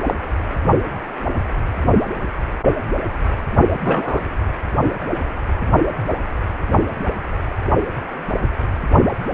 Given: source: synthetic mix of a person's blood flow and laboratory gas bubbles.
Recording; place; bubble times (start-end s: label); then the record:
Doppler ultrasound of blood flow; precordium
0.08-0.15 s: bubbles
3.83-4.21 s: bubbles
From the record:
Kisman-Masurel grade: 123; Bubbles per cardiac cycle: 1 to 2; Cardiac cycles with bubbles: 10 to 50%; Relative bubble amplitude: loud (0.450 to 0.775); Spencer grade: 2 (many but less than half of the cardiac periods contain bubble signals, singularly or in groups); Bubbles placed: only in the low amplitude regions of the cardiac cycle